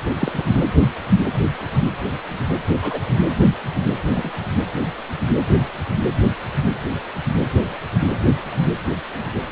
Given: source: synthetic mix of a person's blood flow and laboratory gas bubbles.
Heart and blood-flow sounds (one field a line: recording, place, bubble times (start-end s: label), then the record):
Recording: Doppler ultrasound of blood flow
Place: precordium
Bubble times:
0.18-0.42 s: bubbles
2.81-3.00 s: bubbles
4.09-4.31 s: bubbles
From the record:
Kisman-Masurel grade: 122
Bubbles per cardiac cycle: 1 to 2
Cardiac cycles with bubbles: 10 to 50%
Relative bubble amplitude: moderate (0.250 to 0.450)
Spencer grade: 2 (many but less than half of the cardiac periods contain bubble signals, singularly or in groups)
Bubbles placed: anywhere in the cardiac cycle